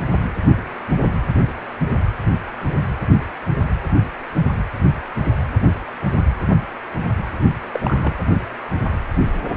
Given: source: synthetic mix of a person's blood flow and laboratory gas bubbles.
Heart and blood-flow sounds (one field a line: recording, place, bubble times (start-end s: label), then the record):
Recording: Doppler ultrasound of blood flow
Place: precordium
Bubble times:
7.40-7.48 s: bubbles
7.74-7.79 s: bubbles
7.84-8.13 s: bubbles
From the record:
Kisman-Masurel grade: 221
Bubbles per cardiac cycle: several, 3 to 8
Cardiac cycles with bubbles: 10 to 50%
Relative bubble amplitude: barely perceptible (0.100 to 0.250)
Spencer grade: 2 (many but less than half of the cardiac periods contain bubble signals, singularly or in groups)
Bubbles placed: anywhere in the cardiac cycle